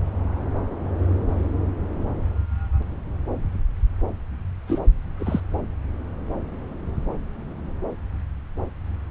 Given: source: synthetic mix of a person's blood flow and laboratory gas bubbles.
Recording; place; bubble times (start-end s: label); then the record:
Doppler ultrasound of blood flow; subclavian vein
4.67-4.79 s: bubbles
5.19-5.40 s: bubbles
From the record:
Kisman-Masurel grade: 212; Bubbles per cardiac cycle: several, 3 to 8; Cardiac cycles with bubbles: 1 to 10%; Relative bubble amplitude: moderate (0.250 to 0.450); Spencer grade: 1 (occasional bubble signal discernible with the cardiac motion signal, with majority of cardiac periods free of bubbles); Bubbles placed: anywhere in the cardiac cycle